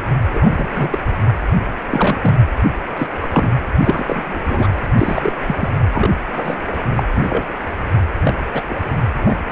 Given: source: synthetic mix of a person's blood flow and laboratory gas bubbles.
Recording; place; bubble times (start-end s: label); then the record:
Doppler ultrasound of blood flow; precordium
0.34-0.67 s: bubbles
0.74-0.98 s: bubbles
1.91-2.17 s: bubbles
2.22-2.35 s: bubbles
2.97-3.08 s: bubbles
3.21-3.49 s: bubbles
3.84-4.39 s: bubbles
4.44-4.67 s: bubbles
4.97-5.33 s: bubbles
5.46-5.69 s: bubbles
5.92-6.10 s: bubbles
6.35-6.58 s: bubbles
6.72-6.77 s: bubbles
6.96-7.03 s: bubbles
7.13-7.44 s: bubbles
8.25-8.33 s: bubbles
8.54-8.62 s: bubbles
8.69-8.80 s: bubbles
9.21-9.37 s: bubbles
9.50-9.52 s: bubbles
From the record:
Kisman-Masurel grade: 242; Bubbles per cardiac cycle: several, 3 to 8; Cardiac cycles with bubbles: 100%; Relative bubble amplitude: moderate (0.250 to 0.450); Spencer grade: 3 (all of the cardiac periods contain showers or single bubble signals, but not dominating or overriding the cardiac motion signals); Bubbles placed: anywhere in the cardiac cycle